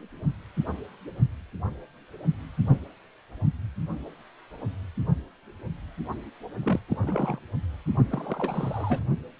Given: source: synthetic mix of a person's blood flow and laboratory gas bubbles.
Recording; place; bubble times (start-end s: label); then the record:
Doppler ultrasound of blood flow; precordium
6.62-6.80 s: bubbles
6.88-6.97 s: bubbles
7.03-7.39 s: bubbles
8.10-9.04 s: bubbles
From the record:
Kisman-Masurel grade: 221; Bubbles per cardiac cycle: several, 3 to 8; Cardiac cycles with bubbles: 10 to 50%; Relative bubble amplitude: barely perceptible (0.100 to 0.250); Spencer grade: 2 (many but less than half of the cardiac periods contain bubble signals, singularly or in groups); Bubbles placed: only in the low amplitude regions of the cardiac cycle